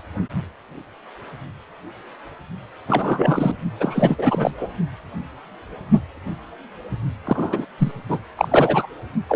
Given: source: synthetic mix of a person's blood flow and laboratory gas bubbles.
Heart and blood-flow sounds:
Doppler ultrasound of blood flow; precordium
2.88-3.55 s: bubbles
3.79-4.53 s: bubbles
4.57-4.67 s: bubbles
7.25-7.65 s: bubbles
7.78-7.92 s: bubbles
8.08-8.21 s: bubbles
8.37-8.86 s: bubbles
9.28-9.36 s: bubbles
From the record:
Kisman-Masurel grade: 333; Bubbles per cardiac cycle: rolling drumbeat, 9 or more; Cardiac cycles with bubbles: 50 to 99%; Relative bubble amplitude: loud (0.450 to 0.775); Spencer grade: 3 (all of the cardiac periods contain showers or single bubble signals, but not dominating or overriding the cardiac motion signals); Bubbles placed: only in the low amplitude regions of the cardiac cycle

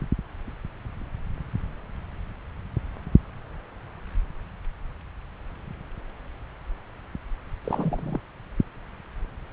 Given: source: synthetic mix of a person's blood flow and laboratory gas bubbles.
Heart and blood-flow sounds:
Doppler ultrasound of blood flow; subclavian vein
7.64-8.21 s: bubbles
From the record:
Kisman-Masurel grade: 211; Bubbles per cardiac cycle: several, 3 to 8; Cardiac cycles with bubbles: 1 to 10%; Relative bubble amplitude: barely perceptible (0.100 to 0.250); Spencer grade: 1 (occasional bubble signal discernible with the cardiac motion signal, with majority of cardiac periods free of bubbles); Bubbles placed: anywhere in the cardiac cycle

